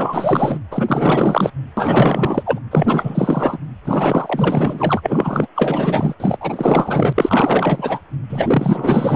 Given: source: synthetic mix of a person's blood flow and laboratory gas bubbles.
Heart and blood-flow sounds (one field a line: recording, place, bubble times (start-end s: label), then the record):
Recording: Doppler ultrasound of blood flow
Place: precordium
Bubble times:
0.00-0.58 s: bubbles
0.71-1.52 s: bubbles
1.77-2.58 s: bubbles
2.71-3.58 s: bubbles
3.85-5.47 s: bubbles
5.55-6.15 s: bubbles
6.20-6.37 s: bubbles
6.40-8.00 s: bubbles
8.29-9.16 s: bubbles
From the record:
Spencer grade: 4 (maximum detectable bubble signal sounding continuously throughout systole and diastole of every cardiac period, and overriding the amplitude of the normal cardiac signals)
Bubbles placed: anywhere in the cardiac cycle